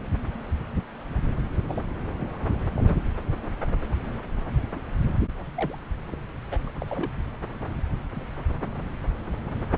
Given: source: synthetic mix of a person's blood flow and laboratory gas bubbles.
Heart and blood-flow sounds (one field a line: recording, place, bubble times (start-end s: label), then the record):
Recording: Doppler ultrasound of blood flow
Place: subclavian vein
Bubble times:
1.68-1.83 s: bubbles
2.15-2.29 s: bubbles
2.76-2.95 s: bubbles
5.56-5.76 s: bubbles
6.12-6.16 s: bubbles
6.51-6.58 s: bubbles
6.67-6.71 s: bubbles
6.82-7.12 s: bubbles
From the record:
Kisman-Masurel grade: 221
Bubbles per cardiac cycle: several, 3 to 8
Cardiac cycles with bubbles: 10 to 50%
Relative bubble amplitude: barely perceptible (0.100 to 0.250)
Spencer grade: 2 (many but less than half of the cardiac periods contain bubble signals, singularly or in groups)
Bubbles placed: anywhere in the cardiac cycle